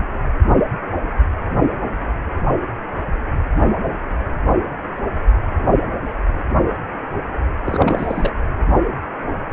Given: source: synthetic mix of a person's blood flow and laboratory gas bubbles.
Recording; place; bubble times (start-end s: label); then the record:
Doppler ultrasound of blood flow; precordium
7.66-8.34 s: bubbles
From the record:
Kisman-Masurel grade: 222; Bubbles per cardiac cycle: several, 3 to 8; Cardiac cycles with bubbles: 10 to 50%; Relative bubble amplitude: moderate (0.250 to 0.450); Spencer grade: 2 (many but less than half of the cardiac periods contain bubble signals, singularly or in groups); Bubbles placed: only in the low amplitude regions of the cardiac cycle